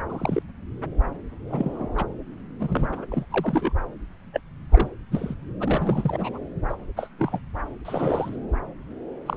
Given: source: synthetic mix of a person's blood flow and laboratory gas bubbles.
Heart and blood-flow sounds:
Doppler ultrasound of blood flow; subclavian vein
0.09-0.42 s: bubbles
1.50-1.88 s: bubbles
1.97-2.05 s: bubbles
2.60-3.06 s: bubbles
3.11-3.25 s: bubbles
3.31-3.72 s: bubbles
4.32-4.40 s: bubbles
4.72-4.88 s: bubbles
5.12-5.35 s: bubbles
5.60-6.38 s: bubbles
6.69-6.76 s: bubbles
6.96-7.08 s: bubbles
7.19-7.39 s: bubbles
7.85-8.38 s: bubbles
9.26-9.36 s: bubbles
From the record:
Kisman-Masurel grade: 242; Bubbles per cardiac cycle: several, 3 to 8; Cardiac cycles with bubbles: 100%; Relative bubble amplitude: moderate (0.250 to 0.450); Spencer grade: 3 (all of the cardiac periods contain showers or single bubble signals, but not dominating or overriding the cardiac motion signals); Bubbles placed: anywhere in the cardiac cycle

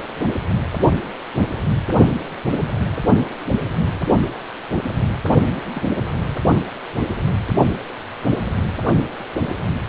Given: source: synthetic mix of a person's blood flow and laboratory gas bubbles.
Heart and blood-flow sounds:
Doppler ultrasound of blood flow; precordium
5.74-6.01 s: bubbles
6.03-6.11 s: bubbles
From the record:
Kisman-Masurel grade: 111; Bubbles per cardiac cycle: 1 to 2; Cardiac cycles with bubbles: 1 to 10%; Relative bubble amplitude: barely perceptible (0.100 to 0.250); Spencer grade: 1 (occasional bubble signal discernible with the cardiac motion signal, with majority of cardiac periods free of bubbles); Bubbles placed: only in the low amplitude regions of the cardiac cycle

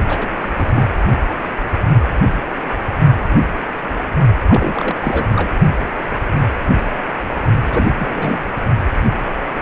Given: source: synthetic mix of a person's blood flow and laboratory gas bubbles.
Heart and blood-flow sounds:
Doppler ultrasound of blood flow; precordium
0.09-0.30 s: bubbles
0.41-0.49 s: bubbles
0.56-0.83 s: bubbles
4.47-4.95 s: bubbles
5.02-5.32 s: bubbles
5.36-5.52 s: bubbles
7.71-7.91 s: bubbles
7.99-8.46 s: bubbles
From the record:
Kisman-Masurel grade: 222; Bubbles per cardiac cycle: several, 3 to 8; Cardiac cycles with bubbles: 10 to 50%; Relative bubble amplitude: moderate (0.250 to 0.450); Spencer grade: 2 (many but less than half of the cardiac periods contain bubble signals, singularly or in groups); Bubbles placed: only in the low amplitude regions of the cardiac cycle

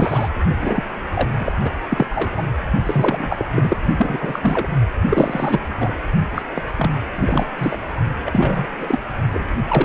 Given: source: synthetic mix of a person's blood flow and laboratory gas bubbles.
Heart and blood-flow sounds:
Doppler ultrasound of blood flow; precordium
0.00-0.29 s: bubbles
0.61-0.83 s: bubbles
1.15-1.31 s: bubbles
1.39-1.52 s: bubbles
1.62-1.72 s: bubbles
1.90-2.05 s: bubbles
2.10-2.46 s: bubbles
2.86-3.46 s: bubbles
3.55-3.77 s: bubbles
3.97-4.69 s: bubbles
5.09-5.71 s: bubbles
5.79-5.92 s: bubbles
6.34-6.42 s: bubbles
6.54-6.62 s: bubbles
6.76-6.91 s: bubbles
7.16-7.46 s: bubbles
7.58-7.79 s: bubbles
8.26-8.69 s: bubbles
8.78-8.99 s: bubbles
9.33-9.54 s: bubbles
9.68-9.85 s: bubbles
From the record:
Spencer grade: 3 (all of the cardiac periods contain showers or single bubble signals, but not dominating or overriding the cardiac motion signals); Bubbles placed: only in the low amplitude regions of the cardiac cycle

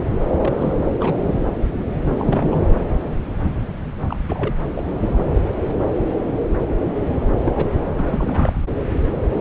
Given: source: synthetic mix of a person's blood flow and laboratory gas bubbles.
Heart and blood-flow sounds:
Doppler ultrasound of blood flow; subclavian vein
0.36-0.76 s: bubbles
1.00-1.41 s: bubbles
2.13-2.75 s: bubbles
4.08-4.17 s: bubbles
4.28-4.54 s: bubbles
4.74-4.83 s: bubbles
5.00-5.21 s: bubbles
7.46-7.52 s: bubbles
7.56-7.68 s: bubbles
7.72-7.81 s: bubbles
7.98-8.02 s: bubbles
8.05-8.62 s: bubbles
From the record:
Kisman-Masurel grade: 221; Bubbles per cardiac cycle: several, 3 to 8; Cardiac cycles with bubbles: 10 to 50%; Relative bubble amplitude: barely perceptible (0.100 to 0.250); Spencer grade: 2 (many but less than half of the cardiac periods contain bubble signals, singularly or in groups); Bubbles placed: anywhere in the cardiac cycle

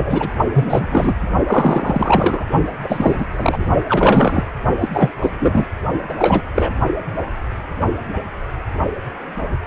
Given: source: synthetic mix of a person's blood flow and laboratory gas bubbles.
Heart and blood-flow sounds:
Doppler ultrasound of blood flow; precordium
0.00-0.28 s: bubbles
0.53-1.15 s: bubbles
1.47-2.45 s: bubbles
2.83-3.26 s: bubbles
3.33-3.67 s: bubbles
3.88-4.43 s: bubbles
4.80-4.88 s: bubbles
4.93-5.12 s: bubbles
5.21-5.31 s: bubbles
5.39-5.64 s: bubbles
6.08-6.13 s: bubbles
6.18-6.41 s: bubbles
6.54-6.71 s: bubbles
From the record:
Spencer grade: 3 (all of the cardiac periods contain showers or single bubble signals, but not dominating or overriding the cardiac motion signals); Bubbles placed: only in the low amplitude regions of the cardiac cycle

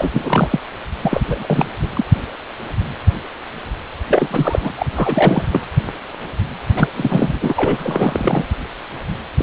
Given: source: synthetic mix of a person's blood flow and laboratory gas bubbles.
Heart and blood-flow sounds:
Doppler ultrasound of blood flow; precordium
0.00-0.60 s: bubbles
1.02-1.21 s: bubbles
1.23-1.67 s: bubbles
1.79-1.88 s: bubbles
1.94-2.04 s: bubbles
4.07-4.75 s: bubbles
4.77-4.86 s: bubbles
4.96-5.47 s: bubbles
5.51-5.60 s: bubbles
6.76-6.88 s: bubbles
6.96-7.53 s: bubbles
7.55-8.45 s: bubbles
9.37-9.43 s: bubbles
From the record:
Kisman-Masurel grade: 333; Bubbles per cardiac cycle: rolling drumbeat, 9 or more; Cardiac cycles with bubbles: 50 to 99%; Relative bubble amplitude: loud (0.450 to 0.775); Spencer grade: 3 (all of the cardiac periods contain showers or single bubble signals, but not dominating or overriding the cardiac motion signals); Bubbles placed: anywhere in the cardiac cycle

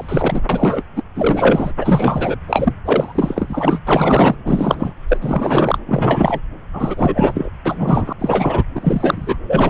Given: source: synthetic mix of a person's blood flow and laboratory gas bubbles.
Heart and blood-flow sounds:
Doppler ultrasound of blood flow; subclavian vein
0.00-0.40 s: bubbles
0.49-0.83 s: bubbles
0.95-1.02 s: bubbles
1.15-1.72 s: bubbles
1.80-2.35 s: bubbles
2.48-2.73 s: bubbles
2.85-3.80 s: bubbles
3.86-4.35 s: bubbles
4.44-4.93 s: bubbles
5.08-5.17 s: bubbles
5.21-5.79 s: bubbles
5.85-6.40 s: bubbles
6.73-7.50 s: bubbles
7.65-8.13 s: bubbles
8.19-8.63 s: bubbles
8.75-9.37 s: bubbles
9.46-9.70 s: bubbles
From the record:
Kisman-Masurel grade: 343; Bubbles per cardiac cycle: rolling drumbeat, 9 or more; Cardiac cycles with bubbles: 100%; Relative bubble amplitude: loud (0.450 to 0.775); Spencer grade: 3 (all of the cardiac periods contain showers or single bubble signals, but not dominating or overriding the cardiac motion signals); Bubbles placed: anywhere in the cardiac cycle

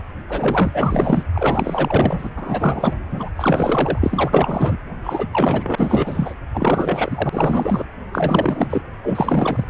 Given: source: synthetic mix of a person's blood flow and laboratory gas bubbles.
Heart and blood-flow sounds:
Doppler ultrasound of blood flow; precordium
0.28-1.23 s: bubbles
1.33-2.31 s: bubbles
2.35-2.93 s: bubbles
3.11-3.29 s: bubbles
3.35-4.78 s: bubbles
5.03-5.28 s: bubbles
5.31-6.34 s: bubbles
6.54-7.85 s: bubbles
8.12-8.67 s: bubbles
8.70-8.82 s: bubbles
9.03-9.70 s: bubbles
From the record:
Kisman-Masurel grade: 444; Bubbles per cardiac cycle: continuous sound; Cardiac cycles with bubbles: 100%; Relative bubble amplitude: maximal (0.775 to 0.999); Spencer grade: 4 (maximum detectable bubble signal sounding continuously throughout systole and diastole of every cardiac period, and overriding the amplitude of the normal cardiac signals); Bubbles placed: anywhere in the cardiac cycle

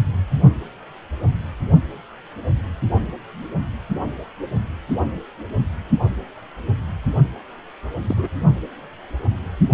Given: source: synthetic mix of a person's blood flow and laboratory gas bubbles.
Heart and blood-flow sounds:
Doppler ultrasound of blood flow; precordium
8.07-8.28 s: bubbles
From the record:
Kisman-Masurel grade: 112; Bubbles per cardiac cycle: 1 to 2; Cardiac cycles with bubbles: 1 to 10%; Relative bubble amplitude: moderate (0.250 to 0.450); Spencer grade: 1 (occasional bubble signal discernible with the cardiac motion signal, with majority of cardiac periods free of bubbles); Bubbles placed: only in the low amplitude regions of the cardiac cycle

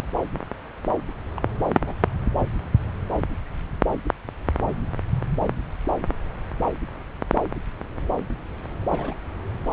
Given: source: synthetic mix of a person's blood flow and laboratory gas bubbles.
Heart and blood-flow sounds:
Doppler ultrasound of blood flow; subclavian vein
1.36-1.40 s: bubbles
1.86-1.95 s: bubbles
8.90-9.13 s: bubbles
From the record:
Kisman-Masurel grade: 121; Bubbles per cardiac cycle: 1 to 2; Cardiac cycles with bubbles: 10 to 50%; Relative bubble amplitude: barely perceptible (0.100 to 0.250); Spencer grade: 2 (many but less than half of the cardiac periods contain bubble signals, singularly or in groups); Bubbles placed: anywhere in the cardiac cycle

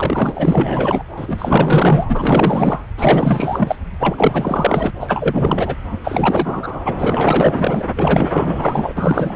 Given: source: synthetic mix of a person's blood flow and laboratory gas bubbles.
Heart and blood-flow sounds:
Doppler ultrasound of blood flow; subclavian vein
0.00-1.03 s: bubbles
1.17-2.05 s: bubbles
2.08-2.85 s: bubbles
2.97-3.81 s: bubbles
4.00-4.92 s: bubbles
5.00-5.75 s: bubbles
5.92-5.98 s: bubbles
6.04-6.79 s: bubbles
6.84-6.95 s: bubbles
6.98-7.83 s: bubbles
7.96-8.94 s: bubbles
8.97-9.36 s: bubbles
From the record:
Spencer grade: 4 (maximum detectable bubble signal sounding continuously throughout systole and diastole of every cardiac period, and overriding the amplitude of the normal cardiac signals); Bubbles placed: anywhere in the cardiac cycle

